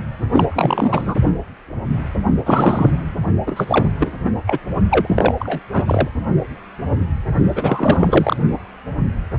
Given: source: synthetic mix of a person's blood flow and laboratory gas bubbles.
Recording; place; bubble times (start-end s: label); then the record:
Doppler ultrasound of blood flow; precordium
0.32-1.15 s: bubbles
2.46-2.91 s: bubbles
3.46-3.88 s: bubbles
4.00-4.11 s: bubbles
4.24-4.31 s: bubbles
4.46-4.58 s: bubbles
4.89-5.34 s: bubbles
5.39-5.59 s: bubbles
5.72-6.08 s: bubbles
7.55-8.37 s: bubbles
From the record:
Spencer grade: 3 (all of the cardiac periods contain showers or single bubble signals, but not dominating or overriding the cardiac motion signals); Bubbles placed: only in the low amplitude regions of the cardiac cycle